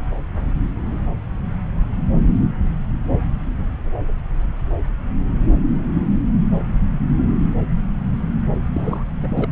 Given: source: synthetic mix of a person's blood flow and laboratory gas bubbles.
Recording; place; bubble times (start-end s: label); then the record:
Doppler ultrasound of blood flow; subclavian vein
8.74-9.04 s: bubbles
9.22-9.52 s: bubbles
From the record:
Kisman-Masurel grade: 211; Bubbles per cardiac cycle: several, 3 to 8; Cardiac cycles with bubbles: 1 to 10%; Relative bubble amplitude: barely perceptible (0.100 to 0.250); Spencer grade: 1 (occasional bubble signal discernible with the cardiac motion signal, with majority of cardiac periods free of bubbles); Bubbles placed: anywhere in the cardiac cycle